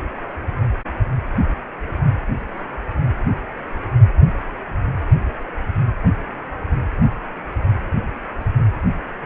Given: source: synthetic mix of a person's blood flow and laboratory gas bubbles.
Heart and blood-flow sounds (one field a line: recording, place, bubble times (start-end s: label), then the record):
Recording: Doppler ultrasound of blood flow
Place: precordium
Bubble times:
no bubbles
From the record:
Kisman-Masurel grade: 000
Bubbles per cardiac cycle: 0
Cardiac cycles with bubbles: 0%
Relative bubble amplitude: no bubbles discernible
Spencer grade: 0 (complete lack of bubble signals)